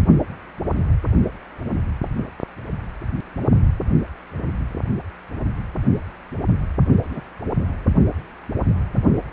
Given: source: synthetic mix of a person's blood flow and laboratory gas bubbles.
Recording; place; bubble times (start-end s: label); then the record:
Doppler ultrasound of blood flow; precordium
7.11-7.21 s: bubbles
From the record:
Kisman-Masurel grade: 121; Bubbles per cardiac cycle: 1 to 2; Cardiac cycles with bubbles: 10 to 50%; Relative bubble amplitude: barely perceptible (0.100 to 0.250); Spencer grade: 2 (many but less than half of the cardiac periods contain bubble signals, singularly or in groups); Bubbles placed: only in the low amplitude regions of the cardiac cycle